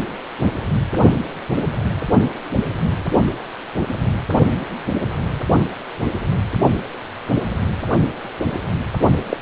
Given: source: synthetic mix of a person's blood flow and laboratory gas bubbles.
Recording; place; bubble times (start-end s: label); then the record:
Doppler ultrasound of blood flow; precordium
9.29-9.37 s: bubbles
From the record:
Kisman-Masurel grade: 112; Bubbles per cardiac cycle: 1 to 2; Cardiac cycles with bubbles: 1 to 10%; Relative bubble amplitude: moderate (0.250 to 0.450); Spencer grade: 1 (occasional bubble signal discernible with the cardiac motion signal, with majority of cardiac periods free of bubbles); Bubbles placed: only in the low amplitude regions of the cardiac cycle